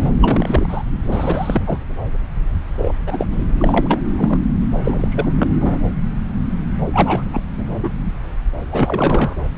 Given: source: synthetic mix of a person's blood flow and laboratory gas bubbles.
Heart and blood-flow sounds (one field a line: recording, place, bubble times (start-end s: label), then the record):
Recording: Doppler ultrasound of blood flow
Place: subclavian vein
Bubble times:
0.00-0.12 s: bubbles
0.18-0.82 s: bubbles
1.06-1.62 s: bubbles
1.65-1.78 s: bubbles
2.78-2.95 s: bubbles
3.06-3.26 s: bubbles
3.32-3.47 s: bubbles
3.58-4.00 s: bubbles
4.17-4.39 s: bubbles
4.82-5.50 s: bubbles
5.60-5.79 s: bubbles
6.93-7.23 s: bubbles
7.33-7.41 s: bubbles
7.57-7.79 s: bubbles
7.82-7.90 s: bubbles
8.71-9.35 s: bubbles
9.56-9.58 s: bubbles
From the record:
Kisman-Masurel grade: 332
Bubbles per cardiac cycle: rolling drumbeat, 9 or more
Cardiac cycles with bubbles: 50 to 99%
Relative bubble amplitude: moderate (0.250 to 0.450)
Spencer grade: 3 (all of the cardiac periods contain showers or single bubble signals, but not dominating or overriding the cardiac motion signals)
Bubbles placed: anywhere in the cardiac cycle